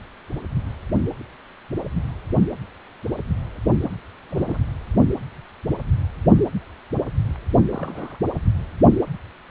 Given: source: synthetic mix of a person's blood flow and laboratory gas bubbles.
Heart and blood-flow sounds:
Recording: Doppler ultrasound of blood flow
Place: precordium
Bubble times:
3.83-3.95 s: bubbles
4.30-4.57 s: bubbles
7.71-8.18 s: bubbles
From the record:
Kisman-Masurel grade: 221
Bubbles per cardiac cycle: several, 3 to 8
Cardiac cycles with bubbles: 10 to 50%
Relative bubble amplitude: barely perceptible (0.100 to 0.250)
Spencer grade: 2 (many but less than half of the cardiac periods contain bubble signals, singularly or in groups)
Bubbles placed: only in the low amplitude regions of the cardiac cycle

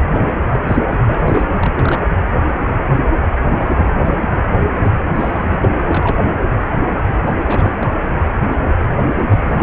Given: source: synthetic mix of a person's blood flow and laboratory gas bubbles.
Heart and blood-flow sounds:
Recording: Doppler ultrasound of blood flow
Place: precordium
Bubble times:
0.09-0.25 s: bubbles
0.28-0.33 s: bubbles
0.53-0.59 s: bubbles
0.67-0.77 s: bubbles
0.84-0.97 s: bubbles
1.06-1.49 s: bubbles
1.56-2.02 s: bubbles
3.57-3.65 s: bubbles
3.75-3.92 s: bubbles
4.78-4.90 s: bubbles
5.14-5.70 s: bubbles
5.89-6.19 s: bubbles
7.27-7.33 s: bubbles
7.48-7.94 s: bubbles
8.79-8.86 s: bubbles
9.17-9.26 s: bubbles
9.29-9.53 s: bubbles
9.55-9.63 s: bubbles
From the record:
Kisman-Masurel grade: 232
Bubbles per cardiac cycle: several, 3 to 8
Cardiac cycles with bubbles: 50 to 99%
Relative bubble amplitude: moderate (0.250 to 0.450)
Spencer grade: 3 (all of the cardiac periods contain showers or single bubble signals, but not dominating or overriding the cardiac motion signals)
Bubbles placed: anywhere in the cardiac cycle

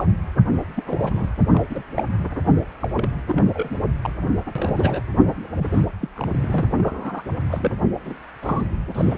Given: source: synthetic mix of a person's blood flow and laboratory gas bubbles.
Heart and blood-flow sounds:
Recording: Doppler ultrasound of blood flow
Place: precordium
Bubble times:
0.00-0.04 s: bubbles
0.76-0.83 s: bubbles
0.85-1.29 s: bubbles
1.52-1.62 s: bubbles
1.69-1.83 s: bubbles
1.94-2.04 s: bubbles
2.79-2.89 s: bubbles
2.96-3.09 s: bubbles
3.27-3.50 s: bubbles
3.53-3.81 s: bubbles
4.02-4.15 s: bubbles
4.55-4.99 s: bubbles
5.58-5.66 s: bubbles
5.71-5.85 s: bubbles
6.01-6.09 s: bubbles
6.16-6.63 s: bubbles
6.78-7.22 s: bubbles
7.49-7.78 s: bubbles
8.05-8.14 s: bubbles
8.42-8.66 s: bubbles
8.95-9.18 s: bubbles
From the record:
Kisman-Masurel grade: 242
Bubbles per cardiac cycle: several, 3 to 8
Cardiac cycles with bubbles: 100%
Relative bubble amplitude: moderate (0.250 to 0.450)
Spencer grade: 3 (all of the cardiac periods contain showers or single bubble signals, but not dominating or overriding the cardiac motion signals)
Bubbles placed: anywhere in the cardiac cycle

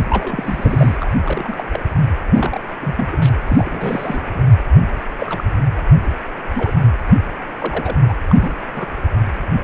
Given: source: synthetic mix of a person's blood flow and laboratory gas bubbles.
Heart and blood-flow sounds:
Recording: Doppler ultrasound of blood flow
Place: precordium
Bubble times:
0.09-0.97 s: bubbles
1.00-1.10 s: bubbles
1.23-1.64 s: bubbles
1.73-1.79 s: bubbles
2.33-2.60 s: bubbles
2.80-3.07 s: bubbles
3.11-3.17 s: bubbles
3.22-3.29 s: bubbles
3.46-4.44 s: bubbles
5.18-5.44 s: bubbles
6.54-6.72 s: bubbles
7.60-7.95 s: bubbles
8.08-8.13 s: bubbles
8.29-8.36 s: bubbles
8.38-8.58 s: bubbles
8.75-8.87 s: bubbles
From the record:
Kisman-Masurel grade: 242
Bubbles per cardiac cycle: several, 3 to 8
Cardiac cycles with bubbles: 100%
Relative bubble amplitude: moderate (0.250 to 0.450)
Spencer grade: 3 (all of the cardiac periods contain showers or single bubble signals, but not dominating or overriding the cardiac motion signals)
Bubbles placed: anywhere in the cardiac cycle

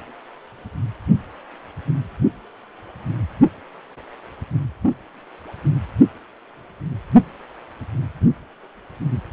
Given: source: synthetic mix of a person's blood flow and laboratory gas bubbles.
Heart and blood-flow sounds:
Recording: Doppler ultrasound of blood flow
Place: precordium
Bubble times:
no bubbles
From the record:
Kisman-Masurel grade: 000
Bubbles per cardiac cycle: 0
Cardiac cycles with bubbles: 0%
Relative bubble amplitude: no bubbles discernible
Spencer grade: 0 (complete lack of bubble signals)

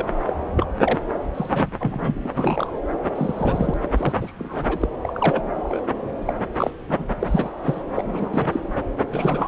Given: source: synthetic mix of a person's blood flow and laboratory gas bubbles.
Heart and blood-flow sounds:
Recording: Doppler ultrasound of blood flow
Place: subclavian vein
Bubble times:
0.00-0.07 s: bubbles
0.27-0.33 s: bubbles
0.56-0.65 s: bubbles
0.81-0.99 s: bubbles
1.34-2.29 s: bubbles
2.37-2.82 s: bubbles
3.15-3.74 s: bubbles
3.97-4.13 s: bubbles
4.21-4.32 s: bubbles
4.39-4.79 s: bubbles
4.82-4.89 s: bubbles
5.01-5.43 s: bubbles
5.57-5.80 s: bubbles
6.26-6.34 s: bubbles
6.56-6.71 s: bubbles
6.88-7.05 s: bubbles
7.20-7.52 s: bubbles
7.64-7.83 s: bubbles
7.96-8.60 s: bubbles
9.12-9.48 s: bubbles
From the record:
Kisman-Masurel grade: 242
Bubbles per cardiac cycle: several, 3 to 8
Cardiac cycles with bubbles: 100%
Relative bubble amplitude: moderate (0.250 to 0.450)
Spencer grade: 3 (all of the cardiac periods contain showers or single bubble signals, but not dominating or overriding the cardiac motion signals)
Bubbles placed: anywhere in the cardiac cycle

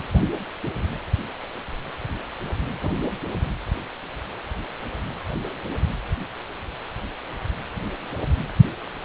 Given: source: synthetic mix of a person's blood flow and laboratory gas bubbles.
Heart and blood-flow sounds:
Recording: Doppler ultrasound of blood flow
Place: precordium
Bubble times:
2.81-2.89 s: bubbles
From the record:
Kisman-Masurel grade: 112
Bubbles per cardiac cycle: 1 to 2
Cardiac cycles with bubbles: 1 to 10%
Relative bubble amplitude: moderate (0.250 to 0.450)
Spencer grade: 1 (occasional bubble signal discernible with the cardiac motion signal, with majority of cardiac periods free of bubbles)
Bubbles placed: anywhere in the cardiac cycle

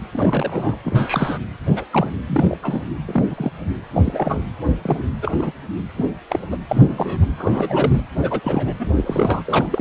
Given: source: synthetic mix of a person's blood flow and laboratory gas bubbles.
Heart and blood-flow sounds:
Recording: Doppler ultrasound of blood flow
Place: precordium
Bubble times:
0.11-0.76 s: bubbles
0.84-1.39 s: bubbles
1.66-1.84 s: bubbles
1.91-2.10 s: bubbles
2.27-2.57 s: bubbles
2.62-2.82 s: bubbles
3.07-3.23 s: bubbles
3.30-3.52 s: bubbles
3.94-4.02 s: bubbles
4.04-4.44 s: bubbles
4.81-5.05 s: bubbles
5.22-5.31 s: bubbles
5.36-5.51 s: bubbles
5.96-6.05 s: bubbles
6.29-6.39 s: bubbles
6.51-6.57 s: bubbles
6.68-7.25 s: bubbles
7.38-8.03 s: bubbles
8.20-8.40 s: bubbles
8.43-8.76 s: bubbles
8.79-8.87 s: bubbles
8.95-9.42 s: bubbles
9.45-9.81 s: bubbles
From the record:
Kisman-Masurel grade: 242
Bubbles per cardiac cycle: several, 3 to 8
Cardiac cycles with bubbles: 100%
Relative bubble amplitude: moderate (0.250 to 0.450)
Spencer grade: 3 (all of the cardiac periods contain showers or single bubble signals, but not dominating or overriding the cardiac motion signals)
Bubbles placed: anywhere in the cardiac cycle

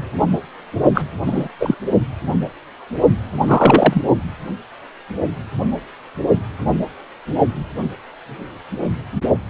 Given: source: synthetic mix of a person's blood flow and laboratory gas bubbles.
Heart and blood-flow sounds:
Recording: Doppler ultrasound of blood flow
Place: precordium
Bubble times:
0.94-1.02 s: bubbles
1.26-1.49 s: bubbles
1.59-1.75 s: bubbles
3.43-4.02 s: bubbles
From the record:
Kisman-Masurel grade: 223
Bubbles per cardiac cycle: several, 3 to 8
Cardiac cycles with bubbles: 10 to 50%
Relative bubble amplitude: loud (0.450 to 0.775)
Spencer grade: 2 (many but less than half of the cardiac periods contain bubble signals, singularly or in groups)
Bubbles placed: only in the low amplitude regions of the cardiac cycle

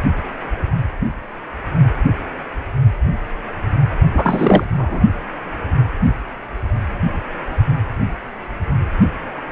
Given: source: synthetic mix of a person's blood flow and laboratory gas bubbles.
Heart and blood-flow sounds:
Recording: Doppler ultrasound of blood flow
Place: precordium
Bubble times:
4.14-4.64 s: bubbles
4.77-5.00 s: bubbles
From the record:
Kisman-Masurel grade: 213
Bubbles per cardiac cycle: several, 3 to 8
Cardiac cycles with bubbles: 1 to 10%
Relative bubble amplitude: loud (0.450 to 0.775)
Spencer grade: 1 (occasional bubble signal discernible with the cardiac motion signal, with majority of cardiac periods free of bubbles)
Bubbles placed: only in the low amplitude regions of the cardiac cycle

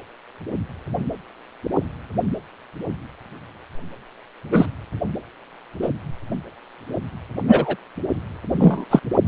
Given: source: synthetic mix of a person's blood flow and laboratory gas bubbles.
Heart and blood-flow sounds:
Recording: Doppler ultrasound of blood flow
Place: precordium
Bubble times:
4.52-4.66 s: bubbles
5.82-5.89 s: bubbles
7.48-7.76 s: bubbles
8.59-8.85 s: bubbles
8.90-8.99 s: bubbles
From the record:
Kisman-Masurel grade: 123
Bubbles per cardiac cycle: 1 to 2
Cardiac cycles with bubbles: 10 to 50%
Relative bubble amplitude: loud (0.450 to 0.775)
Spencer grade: 2 (many but less than half of the cardiac periods contain bubble signals, singularly or in groups)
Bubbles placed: anywhere in the cardiac cycle

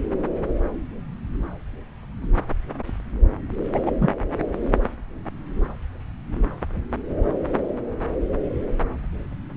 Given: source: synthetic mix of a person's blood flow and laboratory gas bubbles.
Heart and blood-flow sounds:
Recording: Doppler ultrasound of blood flow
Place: subclavian vein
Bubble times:
3.74-3.79 s: bubbles
3.85-3.92 s: bubbles
4.01-4.08 s: bubbles
From the record:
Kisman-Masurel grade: 213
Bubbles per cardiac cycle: several, 3 to 8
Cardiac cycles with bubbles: 1 to 10%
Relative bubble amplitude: loud (0.450 to 0.775)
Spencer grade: 1 (occasional bubble signal discernible with the cardiac motion signal, with majority of cardiac periods free of bubbles)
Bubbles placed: anywhere in the cardiac cycle

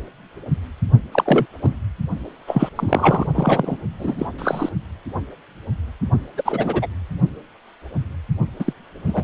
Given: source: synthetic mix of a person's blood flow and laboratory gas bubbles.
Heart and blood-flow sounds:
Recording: Doppler ultrasound of blood flow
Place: precordium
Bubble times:
1.11-1.45 s: bubbles
1.61-1.76 s: bubbles
2.48-2.70 s: bubbles
2.76-3.27 s: bubbles
3.35-3.77 s: bubbles
3.99-4.27 s: bubbles
4.38-4.69 s: bubbles
6.37-6.42 s: bubbles
6.45-6.87 s: bubbles
8.59-8.73 s: bubbles
9.06-9.24 s: bubbles
From the record:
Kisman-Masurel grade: 233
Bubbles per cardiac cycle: several, 3 to 8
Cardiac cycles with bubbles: 50 to 99%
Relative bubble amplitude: loud (0.450 to 0.775)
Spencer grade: 3 (all of the cardiac periods contain showers or single bubble signals, but not dominating or overriding the cardiac motion signals)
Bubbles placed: only in the low amplitude regions of the cardiac cycle

